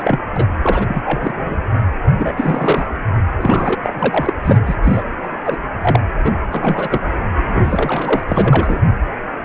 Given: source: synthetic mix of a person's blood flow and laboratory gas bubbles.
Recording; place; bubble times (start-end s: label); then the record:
Doppler ultrasound of blood flow; precordium
0.00-0.18 s: bubbles
0.36-0.46 s: bubbles
0.62-1.00 s: bubbles
1.03-1.56 s: bubbles
2.18-2.86 s: bubbles
3.40-3.75 s: bubbles
3.83-4.33 s: bubbles
4.44-4.59 s: bubbles
4.66-4.76 s: bubbles
4.83-5.03 s: bubbles
5.23-5.28 s: bubbles
5.44-5.58 s: bubbles
5.81-6.00 s: bubbles
6.24-6.33 s: bubbles
6.52-7.00 s: bubbles
7.47-8.24 s: bubbles
8.28-8.81 s: bubbles
From the record:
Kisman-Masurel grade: 232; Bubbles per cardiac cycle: several, 3 to 8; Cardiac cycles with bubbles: 50 to 99%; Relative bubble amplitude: moderate (0.250 to 0.450); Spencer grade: 3 (all of the cardiac periods contain showers or single bubble signals, but not dominating or overriding the cardiac motion signals); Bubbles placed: anywhere in the cardiac cycle